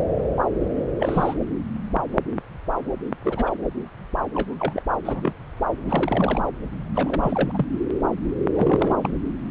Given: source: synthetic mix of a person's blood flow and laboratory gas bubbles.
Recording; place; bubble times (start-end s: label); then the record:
Doppler ultrasound of blood flow; subclavian vein
0.99-1.35 s: bubbles
3.24-3.51 s: bubbles
4.33-4.54 s: bubbles
4.59-4.81 s: bubbles
5.05-5.32 s: bubbles
5.86-6.41 s: bubbles
6.95-7.66 s: bubbles
8.54-8.98 s: bubbles
9.02-9.12 s: bubbles
From the record:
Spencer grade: 2 (many but less than half of the cardiac periods contain bubble signals, singularly or in groups); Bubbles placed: anywhere in the cardiac cycle